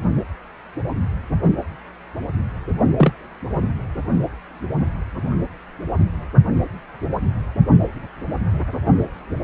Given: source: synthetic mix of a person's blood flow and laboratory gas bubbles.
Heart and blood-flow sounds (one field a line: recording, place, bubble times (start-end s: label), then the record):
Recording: Doppler ultrasound of blood flow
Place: precordium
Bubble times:
2.98-3.12 s: bubbles
From the record:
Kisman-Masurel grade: 113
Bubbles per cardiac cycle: 1 to 2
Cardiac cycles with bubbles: 1 to 10%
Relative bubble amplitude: loud (0.450 to 0.775)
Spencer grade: 1 (occasional bubble signal discernible with the cardiac motion signal, with majority of cardiac periods free of bubbles)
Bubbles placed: anywhere in the cardiac cycle